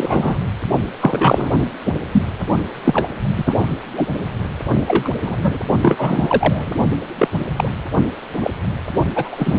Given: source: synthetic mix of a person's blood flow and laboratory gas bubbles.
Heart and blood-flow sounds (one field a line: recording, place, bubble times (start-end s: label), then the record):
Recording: Doppler ultrasound of blood flow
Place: precordium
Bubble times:
0.00-0.39 s: bubbles
1.00-1.52 s: bubbles
1.85-1.93 s: bubbles
2.12-2.25 s: bubbles
2.84-3.08 s: bubbles
3.36-3.66 s: bubbles
3.97-4.07 s: bubbles
4.87-5.09 s: bubbles
5.23-5.58 s: bubbles
5.82-6.73 s: bubbles
7.18-7.28 s: bubbles
7.57-7.70 s: bubbles
8.40-8.50 s: bubbles
9.15-9.59 s: bubbles
From the record:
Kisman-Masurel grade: 243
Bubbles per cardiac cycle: several, 3 to 8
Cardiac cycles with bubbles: 100%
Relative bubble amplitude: loud (0.450 to 0.775)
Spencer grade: 3 (all of the cardiac periods contain showers or single bubble signals, but not dominating or overriding the cardiac motion signals)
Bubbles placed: only in the low amplitude regions of the cardiac cycle